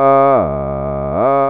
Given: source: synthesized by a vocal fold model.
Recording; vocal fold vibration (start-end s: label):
sustained vowel that changes in the middle
0.00-0.30 s: 137.5 Hz, open quotient 0.25
0.50-1.10 s: 69.2 Hz, open quotient 0.34
1.30-1.50 s: 137.5 Hz, open quotient 0.25